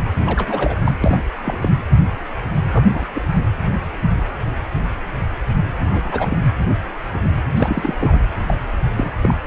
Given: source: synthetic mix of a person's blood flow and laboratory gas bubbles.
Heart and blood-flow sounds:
Doppler ultrasound of blood flow; precordium
0.18-0.80 s: bubbles
0.84-0.96 s: bubbles
1.04-1.21 s: bubbles
1.44-1.70 s: bubbles
2.72-2.86 s: bubbles
2.93-3.10 s: bubbles
3.15-3.22 s: bubbles
5.85-6.38 s: bubbles
7.57-7.94 s: bubbles
7.99-8.18 s: bubbles
8.47-8.59 s: bubbles
8.96-9.12 s: bubbles
9.22-9.37 s: bubbles
From the record:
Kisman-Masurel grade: 232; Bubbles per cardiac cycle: several, 3 to 8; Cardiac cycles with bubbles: 50 to 99%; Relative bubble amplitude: moderate (0.250 to 0.450); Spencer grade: 3 (all of the cardiac periods contain showers or single bubble signals, but not dominating or overriding the cardiac motion signals); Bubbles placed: anywhere in the cardiac cycle

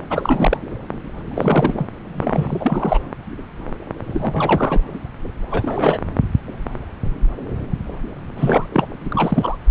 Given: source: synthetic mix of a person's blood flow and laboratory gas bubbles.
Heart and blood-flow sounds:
Doppler ultrasound of blood flow; subclavian vein
0.10-0.57 s: bubbles
1.35-1.86 s: bubbles
2.15-3.00 s: bubbles
4.13-4.80 s: bubbles
5.50-5.99 s: bubbles
8.36-8.70 s: bubbles
8.72-8.88 s: bubbles
9.01-9.57 s: bubbles
From the record:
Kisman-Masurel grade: 332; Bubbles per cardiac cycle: rolling drumbeat, 9 or more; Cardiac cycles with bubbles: 50 to 99%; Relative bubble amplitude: moderate (0.250 to 0.450); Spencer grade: 3 (all of the cardiac periods contain showers or single bubble signals, but not dominating or overriding the cardiac motion signals); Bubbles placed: anywhere in the cardiac cycle

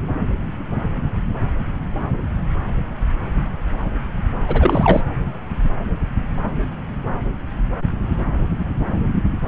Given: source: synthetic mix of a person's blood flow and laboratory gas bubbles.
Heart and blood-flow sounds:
Doppler ultrasound of blood flow; subclavian vein
4.47-5.02 s: bubbles
From the record:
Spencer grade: 1 (occasional bubble signal discernible with the cardiac motion signal, with majority of cardiac periods free of bubbles); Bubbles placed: anywhere in the cardiac cycle

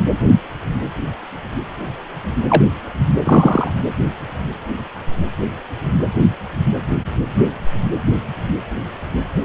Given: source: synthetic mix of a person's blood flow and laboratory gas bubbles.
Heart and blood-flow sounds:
Doppler ultrasound of blood flow; precordium
2.49-2.63 s: bubbles
3.21-3.70 s: bubbles
From the record:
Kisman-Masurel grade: 113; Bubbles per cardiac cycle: 1 to 2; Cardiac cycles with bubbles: 1 to 10%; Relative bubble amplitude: loud (0.450 to 0.775); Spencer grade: 1 (occasional bubble signal discernible with the cardiac motion signal, with majority of cardiac periods free of bubbles); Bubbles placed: anywhere in the cardiac cycle

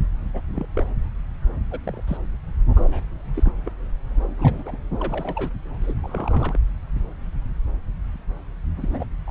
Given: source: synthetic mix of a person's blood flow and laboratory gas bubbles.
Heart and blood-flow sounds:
Doppler ultrasound of blood flow; subclavian vein
0.34-0.41 s: bubbles
0.48-0.65 s: bubbles
0.75-0.86 s: bubbles
1.71-1.79 s: bubbles
1.84-2.01 s: bubbles
2.08-2.17 s: bubbles
2.75-3.04 s: bubbles
3.34-3.52 s: bubbles
3.65-3.72 s: bubbles
4.38-4.76 s: bubbles
4.99-5.50 s: bubbles
5.81-5.93 s: bubbles
6.03-6.57 s: bubbles
8.76-9.06 s: bubbles
9.27-9.30 s: bubbles
From the record:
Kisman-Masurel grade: 221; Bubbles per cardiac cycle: several, 3 to 8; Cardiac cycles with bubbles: 10 to 50%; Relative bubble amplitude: barely perceptible (0.100 to 0.250); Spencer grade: 2 (many but less than half of the cardiac periods contain bubble signals, singularly or in groups); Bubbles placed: anywhere in the cardiac cycle

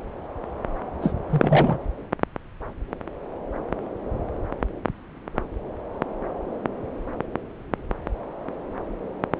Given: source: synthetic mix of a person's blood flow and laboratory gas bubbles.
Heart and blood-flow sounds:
Doppler ultrasound of blood flow; subclavian vein
1.01-1.11 s: bubbles
1.29-1.78 s: bubbles
From the record:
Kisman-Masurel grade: 211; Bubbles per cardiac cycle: several, 3 to 8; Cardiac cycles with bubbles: 1 to 10%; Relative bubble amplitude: barely perceptible (0.100 to 0.250); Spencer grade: 1 (occasional bubble signal discernible with the cardiac motion signal, with majority of cardiac periods free of bubbles); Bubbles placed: anywhere in the cardiac cycle

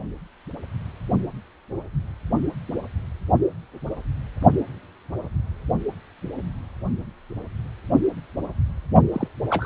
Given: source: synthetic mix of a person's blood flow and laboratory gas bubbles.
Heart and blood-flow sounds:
Doppler ultrasound of blood flow; precordium
9.12-9.29 s: bubbles
9.50-9.66 s: bubbles
From the record:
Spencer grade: 1 (occasional bubble signal discernible with the cardiac motion signal, with majority of cardiac periods free of bubbles); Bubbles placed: only in the low amplitude regions of the cardiac cycle

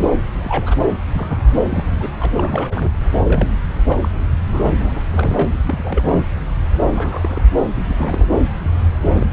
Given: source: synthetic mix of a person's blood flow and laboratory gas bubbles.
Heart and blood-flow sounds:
Doppler ultrasound of blood flow; subclavian vein
0.00-0.06 s: bubbles
0.42-0.76 s: bubbles
1.13-1.59 s: bubbles
1.70-2.09 s: bubbles
2.19-2.32 s: bubbles
2.37-2.91 s: bubbles
3.24-3.54 s: bubbles
3.88-3.97 s: bubbles
4.01-4.08 s: bubbles
4.52-5.01 s: bubbles
5.10-5.62 s: bubbles
5.65-6.25 s: bubbles
6.78-7.42 s: bubbles
7.75-7.83 s: bubbles
7.88-8.38 s: bubbles
9.04-9.33 s: bubbles
From the record:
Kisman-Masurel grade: 242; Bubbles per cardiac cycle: several, 3 to 8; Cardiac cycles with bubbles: 100%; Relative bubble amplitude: moderate (0.250 to 0.450); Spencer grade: 3 (all of the cardiac periods contain showers or single bubble signals, but not dominating or overriding the cardiac motion signals); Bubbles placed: anywhere in the cardiac cycle

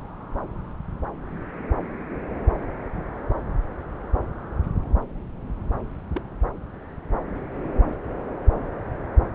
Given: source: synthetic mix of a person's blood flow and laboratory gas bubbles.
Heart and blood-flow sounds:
Doppler ultrasound of blood flow; subclavian vein
6.13-6.22 s: bubbles
From the record:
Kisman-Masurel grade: 111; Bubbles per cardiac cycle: 1 to 2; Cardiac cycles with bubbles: 1 to 10%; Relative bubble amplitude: barely perceptible (0.100 to 0.250); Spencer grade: 1 (occasional bubble signal discernible with the cardiac motion signal, with majority of cardiac periods free of bubbles); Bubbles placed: anywhere in the cardiac cycle

